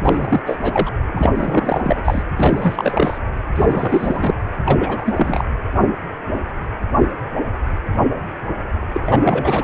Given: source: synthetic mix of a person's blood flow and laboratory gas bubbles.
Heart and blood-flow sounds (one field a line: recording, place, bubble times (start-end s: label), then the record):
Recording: Doppler ultrasound of blood flow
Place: precordium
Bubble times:
0.02-0.43 s: bubbles
0.45-0.58 s: bubbles
0.61-0.90 s: bubbles
1.12-1.31 s: bubbles
1.35-2.22 s: bubbles
2.36-3.18 s: bubbles
3.55-4.37 s: bubbles
4.65-5.44 s: bubbles
8.92-9.64 s: bubbles
From the record:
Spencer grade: 3 (all of the cardiac periods contain showers or single bubble signals, but not dominating or overriding the cardiac motion signals)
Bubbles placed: anywhere in the cardiac cycle